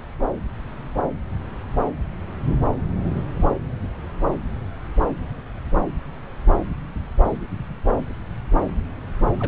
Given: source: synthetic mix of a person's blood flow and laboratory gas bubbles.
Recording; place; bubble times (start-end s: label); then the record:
Doppler ultrasound of blood flow; subclavian vein
3.03-3.21 s: bubbles
3.37-3.46 s: bubbles
9.40-9.48 s: bubbles
From the record:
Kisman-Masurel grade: 221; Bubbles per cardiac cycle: several, 3 to 8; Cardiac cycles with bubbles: 10 to 50%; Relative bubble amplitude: barely perceptible (0.100 to 0.250); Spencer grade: 2 (many but less than half of the cardiac periods contain bubble signals, singularly or in groups); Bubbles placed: anywhere in the cardiac cycle